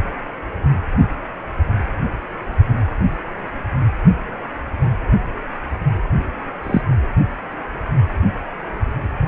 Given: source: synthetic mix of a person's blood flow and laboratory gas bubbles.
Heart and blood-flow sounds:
Doppler ultrasound of blood flow; precordium
6.63-6.82 s: bubbles
From the record:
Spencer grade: 1 (occasional bubble signal discernible with the cardiac motion signal, with majority of cardiac periods free of bubbles); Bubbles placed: anywhere in the cardiac cycle

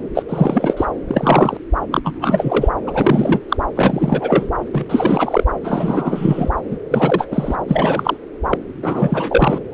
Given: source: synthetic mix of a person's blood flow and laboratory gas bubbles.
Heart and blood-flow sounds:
Doppler ultrasound of blood flow; subclavian vein
0.14-0.23 s: bubbles
0.28-0.74 s: bubbles
0.77-0.85 s: bubbles
1.08-1.57 s: bubbles
1.91-1.99 s: bubbles
2.04-2.69 s: bubbles
2.86-3.40 s: bubbles
3.48-3.57 s: bubbles
3.75-4.50 s: bubbles
4.73-4.85 s: bubbles
4.89-5.44 s: bubbles
5.64-6.50 s: bubbles
6.70-6.77 s: bubbles
6.91-7.27 s: bubbles
7.31-7.56 s: bubbles
7.68-8.17 s: bubbles
8.50-8.57 s: bubbles
8.82-9.59 s: bubbles
9.72-9.74 s: bubbles
From the record:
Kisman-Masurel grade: 343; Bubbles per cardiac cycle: rolling drumbeat, 9 or more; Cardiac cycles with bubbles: 100%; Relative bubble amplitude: loud (0.450 to 0.775); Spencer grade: 3 (all of the cardiac periods contain showers or single bubble signals, but not dominating or overriding the cardiac motion signals); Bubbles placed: anywhere in the cardiac cycle

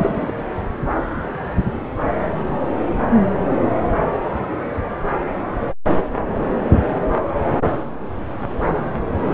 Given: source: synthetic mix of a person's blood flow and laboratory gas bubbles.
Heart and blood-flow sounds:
Doppler ultrasound of blood flow; subclavian vein
0.00-0.32 s: bubbles
From the record:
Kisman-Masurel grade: 212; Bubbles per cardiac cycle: several, 3 to 8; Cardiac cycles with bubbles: 1 to 10%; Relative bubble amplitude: moderate (0.250 to 0.450); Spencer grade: 1 (occasional bubble signal discernible with the cardiac motion signal, with majority of cardiac periods free of bubbles); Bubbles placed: anywhere in the cardiac cycle

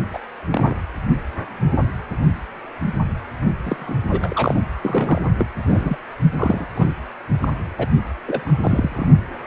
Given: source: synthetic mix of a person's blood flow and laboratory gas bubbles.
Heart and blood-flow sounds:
Doppler ultrasound of blood flow; precordium
0.12-0.19 s: bubbles
0.50-0.76 s: bubbles
3.63-3.95 s: bubbles
4.10-4.60 s: bubbles
4.82-5.20 s: bubbles
5.39-5.46 s: bubbles
5.68-5.97 s: bubbles
6.32-6.67 s: bubbles
6.75-6.94 s: bubbles
7.42-7.48 s: bubbles
7.78-7.88 s: bubbles
8.26-8.54 s: bubbles
8.63-9.07 s: bubbles
From the record:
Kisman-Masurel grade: 222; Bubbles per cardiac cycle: several, 3 to 8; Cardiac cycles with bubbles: 10 to 50%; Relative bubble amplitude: moderate (0.250 to 0.450); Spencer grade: 2 (many but less than half of the cardiac periods contain bubble signals, singularly or in groups); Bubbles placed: only in the low amplitude regions of the cardiac cycle

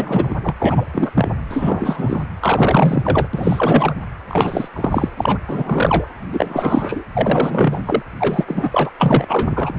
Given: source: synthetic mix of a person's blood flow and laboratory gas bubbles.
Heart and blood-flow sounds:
Doppler ultrasound of blood flow; precordium
0.00-0.34 s: bubbles
0.42-0.54 s: bubbles
0.59-0.86 s: bubbles
0.93-1.11 s: bubbles
1.15-1.28 s: bubbles
1.48-2.26 s: bubbles
2.40-3.29 s: bubbles
3.33-3.95 s: bubbles
4.29-4.68 s: bubbles
4.75-5.09 s: bubbles
5.17-5.38 s: bubbles
5.47-6.08 s: bubbles
6.32-7.04 s: bubbles
7.14-7.80 s: bubbles
7.85-8.03 s: bubbles
8.20-8.45 s: bubbles
8.48-8.90 s: bubbles
8.99-9.75 s: bubbles
From the record:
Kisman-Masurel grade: 343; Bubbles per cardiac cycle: rolling drumbeat, 9 or more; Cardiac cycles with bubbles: 100%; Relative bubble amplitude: loud (0.450 to 0.775); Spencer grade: 3 (all of the cardiac periods contain showers or single bubble signals, but not dominating or overriding the cardiac motion signals); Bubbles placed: anywhere in the cardiac cycle

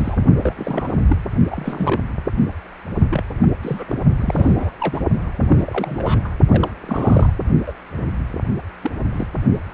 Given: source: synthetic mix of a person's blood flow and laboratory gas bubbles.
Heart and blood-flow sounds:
Doppler ultrasound of blood flow; precordium
0.00-0.26 s: bubbles
0.40-0.53 s: bubbles
0.56-0.95 s: bubbles
1.09-1.16 s: bubbles
1.51-2.02 s: bubbles
3.10-3.24 s: bubbles
3.40-3.48 s: bubbles
3.61-4.04 s: bubbles
4.16-4.71 s: bubbles
4.79-5.00 s: bubbles
5.39-6.29 s: bubbles
6.47-6.71 s: bubbles
6.82-7.32 s: bubbles
7.67-7.73 s: bubbles
8.00-8.05 s: bubbles
8.82-8.91 s: bubbles
9.12-9.27 s: bubbles
From the record:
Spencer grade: 3 (all of the cardiac periods contain showers or single bubble signals, but not dominating or overriding the cardiac motion signals); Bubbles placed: only in the low amplitude regions of the cardiac cycle

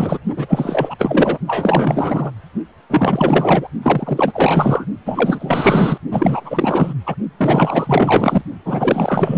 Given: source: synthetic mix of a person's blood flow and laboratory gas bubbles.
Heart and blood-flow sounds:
Doppler ultrasound of blood flow; precordium
0.00-0.19 s: bubbles
0.36-0.96 s: bubbles
0.98-1.38 s: bubbles
1.47-2.31 s: bubbles
2.90-3.68 s: bubbles
3.82-4.85 s: bubbles
5.06-5.98 s: bubbles
6.11-6.93 s: bubbles
7.06-7.15 s: bubbles
7.37-8.42 s: bubbles
8.65-9.38 s: bubbles
From the record:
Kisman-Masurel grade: 444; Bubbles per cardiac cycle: continuous sound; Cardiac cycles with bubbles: 100%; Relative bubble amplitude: maximal (0.775 to 0.999); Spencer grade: 4 (maximum detectable bubble signal sounding continuously throughout systole and diastole of every cardiac period, and overriding the amplitude of the normal cardiac signals); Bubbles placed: only in the low amplitude regions of the cardiac cycle

